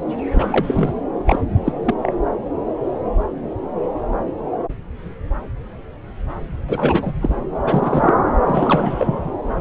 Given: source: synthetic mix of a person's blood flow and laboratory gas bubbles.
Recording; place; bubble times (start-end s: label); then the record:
Doppler ultrasound of blood flow; subclavian vein
0.35-0.93 s: bubbles
1.26-1.40 s: bubbles
1.64-1.72 s: bubbles
1.84-1.94 s: bubbles
2.02-2.12 s: bubbles
6.69-7.16 s: bubbles
7.21-7.36 s: bubbles
7.65-8.22 s: bubbles
8.45-9.32 s: bubbles
From the record:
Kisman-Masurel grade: 222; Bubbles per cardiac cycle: several, 3 to 8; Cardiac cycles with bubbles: 10 to 50%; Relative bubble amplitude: moderate (0.250 to 0.450); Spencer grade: 2 (many but less than half of the cardiac periods contain bubble signals, singularly or in groups); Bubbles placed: anywhere in the cardiac cycle